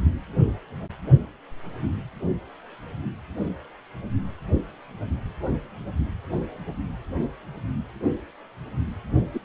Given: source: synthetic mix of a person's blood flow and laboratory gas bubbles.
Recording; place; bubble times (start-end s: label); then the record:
Doppler ultrasound of blood flow; precordium
9.34-9.39 s: bubbles
From the record:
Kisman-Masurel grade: 112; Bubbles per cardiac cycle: 1 to 2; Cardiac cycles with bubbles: 1 to 10%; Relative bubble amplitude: moderate (0.250 to 0.450); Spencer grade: 1 (occasional bubble signal discernible with the cardiac motion signal, with majority of cardiac periods free of bubbles); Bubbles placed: only in the low amplitude regions of the cardiac cycle